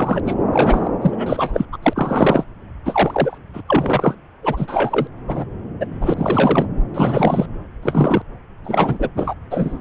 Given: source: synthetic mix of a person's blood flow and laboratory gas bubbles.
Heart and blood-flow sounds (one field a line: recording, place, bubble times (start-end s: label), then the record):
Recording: Doppler ultrasound of blood flow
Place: subclavian vein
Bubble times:
0.00-0.20 s: bubbles
0.26-0.34 s: bubbles
0.53-0.89 s: bubbles
1.02-1.65 s: bubbles
1.72-1.78 s: bubbles
1.82-2.44 s: bubbles
2.85-3.38 s: bubbles
3.53-3.60 s: bubbles
3.68-4.15 s: bubbles
4.43-5.07 s: bubbles
5.27-5.45 s: bubbles
5.80-5.86 s: bubbles
6.01-6.65 s: bubbles
6.94-7.46 s: bubbles
7.82-8.22 s: bubbles
8.63-9.08 s: bubbles
9.16-9.34 s: bubbles
9.50-9.79 s: bubbles
From the record:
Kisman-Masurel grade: 243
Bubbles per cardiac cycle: several, 3 to 8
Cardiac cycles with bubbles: 100%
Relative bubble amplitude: loud (0.450 to 0.775)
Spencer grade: 3 (all of the cardiac periods contain showers or single bubble signals, but not dominating or overriding the cardiac motion signals)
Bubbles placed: anywhere in the cardiac cycle